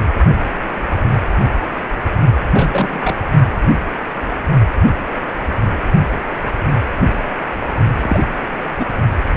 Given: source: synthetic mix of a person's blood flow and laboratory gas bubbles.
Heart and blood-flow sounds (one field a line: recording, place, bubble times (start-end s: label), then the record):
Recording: Doppler ultrasound of blood flow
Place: precordium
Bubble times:
2.53-3.15 s: bubbles
8.02-8.26 s: bubbles
8.79-8.86 s: bubbles
From the record:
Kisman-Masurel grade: 222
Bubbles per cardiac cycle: several, 3 to 8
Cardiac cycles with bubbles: 10 to 50%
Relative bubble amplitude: moderate (0.250 to 0.450)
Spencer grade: 2 (many but less than half of the cardiac periods contain bubble signals, singularly or in groups)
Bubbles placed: only in the low amplitude regions of the cardiac cycle